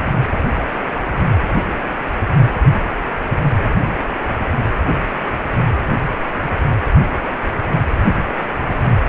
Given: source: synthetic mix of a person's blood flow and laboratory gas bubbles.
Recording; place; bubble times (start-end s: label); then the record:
Doppler ultrasound of blood flow; precordium
8.69-8.75 s: bubbles
From the record:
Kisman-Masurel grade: 112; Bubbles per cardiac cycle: 1 to 2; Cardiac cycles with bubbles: 1 to 10%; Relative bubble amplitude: moderate (0.250 to 0.450); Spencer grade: 1 (occasional bubble signal discernible with the cardiac motion signal, with majority of cardiac periods free of bubbles); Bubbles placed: anywhere in the cardiac cycle